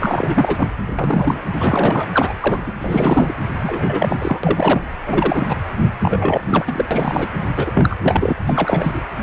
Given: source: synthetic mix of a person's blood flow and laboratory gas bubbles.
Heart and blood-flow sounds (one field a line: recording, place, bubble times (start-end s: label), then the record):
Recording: Doppler ultrasound of blood flow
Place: precordium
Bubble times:
0.00-0.69 s: bubbles
0.99-1.41 s: bubbles
1.59-2.08 s: bubbles
2.12-2.33 s: bubbles
2.40-2.60 s: bubbles
2.66-2.73 s: bubbles
2.79-3.36 s: bubbles
3.62-4.41 s: bubbles
4.43-4.82 s: bubbles
5.05-5.56 s: bubbles
6.02-6.42 s: bubbles
6.50-6.85 s: bubbles
6.91-7.28 s: bubbles
7.56-7.71 s: bubbles
7.74-7.95 s: bubbles
8.03-8.33 s: bubbles
8.46-9.02 s: bubbles
From the record:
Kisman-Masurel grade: 333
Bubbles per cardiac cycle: rolling drumbeat, 9 or more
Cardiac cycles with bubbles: 50 to 99%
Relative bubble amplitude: loud (0.450 to 0.775)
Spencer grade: 3 (all of the cardiac periods contain showers or single bubble signals, but not dominating or overriding the cardiac motion signals)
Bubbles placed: anywhere in the cardiac cycle